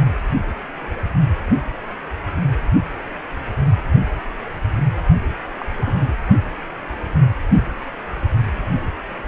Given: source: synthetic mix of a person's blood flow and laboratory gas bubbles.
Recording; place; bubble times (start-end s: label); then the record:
Doppler ultrasound of blood flow; precordium
5.60-5.66 s: bubbles
5.75-6.14 s: bubbles
From the record:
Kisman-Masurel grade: 111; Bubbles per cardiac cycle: 1 to 2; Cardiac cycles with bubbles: 1 to 10%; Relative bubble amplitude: barely perceptible (0.100 to 0.250); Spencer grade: 1 (occasional bubble signal discernible with the cardiac motion signal, with majority of cardiac periods free of bubbles); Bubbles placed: only in the low amplitude regions of the cardiac cycle